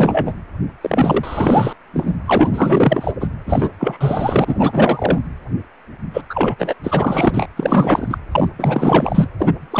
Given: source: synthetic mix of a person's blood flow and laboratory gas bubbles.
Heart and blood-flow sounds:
Doppler ultrasound of blood flow; precordium
0.00-0.35 s: bubbles
0.81-1.73 s: bubbles
1.93-2.17 s: bubbles
2.26-3.12 s: bubbles
3.20-3.28 s: bubbles
3.46-3.69 s: bubbles
3.79-5.18 s: bubbles
6.13-6.22 s: bubbles
6.29-6.74 s: bubbles
6.83-7.46 s: bubbles
7.57-8.18 s: bubbles
8.32-8.48 s: bubbles
8.59-9.29 s: bubbles
9.39-9.52 s: bubbles
9.71-9.80 s: bubbles
From the record:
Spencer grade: 4 (maximum detectable bubble signal sounding continuously throughout systole and diastole of every cardiac period, and overriding the amplitude of the normal cardiac signals); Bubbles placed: anywhere in the cardiac cycle

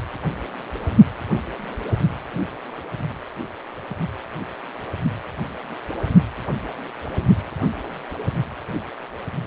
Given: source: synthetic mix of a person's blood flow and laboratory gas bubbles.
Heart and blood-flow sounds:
Doppler ultrasound of blood flow; precordium
no bubbles
From the record:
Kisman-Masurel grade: 000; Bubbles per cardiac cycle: 0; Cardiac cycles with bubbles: 0%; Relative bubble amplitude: no bubbles discernible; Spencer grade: 0 (complete lack of bubble signals)

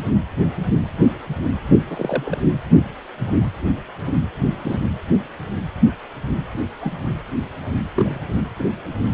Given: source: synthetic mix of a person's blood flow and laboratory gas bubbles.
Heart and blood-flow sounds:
Doppler ultrasound of blood flow; precordium
1.88-2.38 s: bubbles
4.64-4.78 s: bubbles
6.80-6.94 s: bubbles
7.95-8.21 s: bubbles
8.59-8.63 s: bubbles
From the record:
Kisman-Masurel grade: 122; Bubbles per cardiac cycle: 1 to 2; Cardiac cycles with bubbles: 10 to 50%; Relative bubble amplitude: moderate (0.250 to 0.450); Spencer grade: 2 (many but less than half of the cardiac periods contain bubble signals, singularly or in groups); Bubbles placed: anywhere in the cardiac cycle

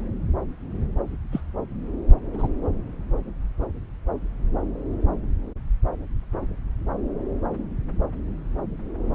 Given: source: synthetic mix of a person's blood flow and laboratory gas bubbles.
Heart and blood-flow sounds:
Doppler ultrasound of blood flow; subclavian vein
1.32-1.40 s: bubbles
2.33-2.48 s: bubbles
From the record:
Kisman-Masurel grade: 121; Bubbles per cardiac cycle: 1 to 2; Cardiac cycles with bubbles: 10 to 50%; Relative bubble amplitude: barely perceptible (0.100 to 0.250); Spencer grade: 2 (many but less than half of the cardiac periods contain bubble signals, singularly or in groups); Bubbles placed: anywhere in the cardiac cycle

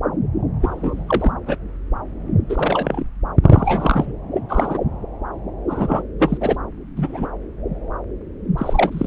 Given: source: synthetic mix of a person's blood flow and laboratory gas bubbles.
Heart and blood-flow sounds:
Doppler ultrasound of blood flow; subclavian vein
0.61-1.32 s: bubbles
1.46-1.56 s: bubbles
2.49-3.04 s: bubbles
3.43-4.13 s: bubbles
4.37-4.40 s: bubbles
4.49-4.78 s: bubbles
5.67-6.03 s: bubbles
6.19-6.38 s: bubbles
6.40-6.56 s: bubbles
6.96-7.29 s: bubbles
8.57-9.07 s: bubbles
From the record:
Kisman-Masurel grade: 233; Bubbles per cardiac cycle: several, 3 to 8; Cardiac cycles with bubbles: 50 to 99%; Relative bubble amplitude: loud (0.450 to 0.775); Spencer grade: 3 (all of the cardiac periods contain showers or single bubble signals, but not dominating or overriding the cardiac motion signals); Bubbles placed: anywhere in the cardiac cycle

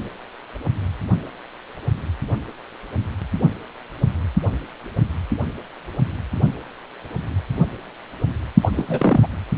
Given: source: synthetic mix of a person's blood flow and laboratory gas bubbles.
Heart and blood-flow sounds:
Doppler ultrasound of blood flow; precordium
8.62-8.69 s: bubbles
8.76-9.20 s: bubbles
9.22-9.27 s: bubbles
From the record:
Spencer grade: 1 (occasional bubble signal discernible with the cardiac motion signal, with majority of cardiac periods free of bubbles); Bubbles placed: only in the low amplitude regions of the cardiac cycle

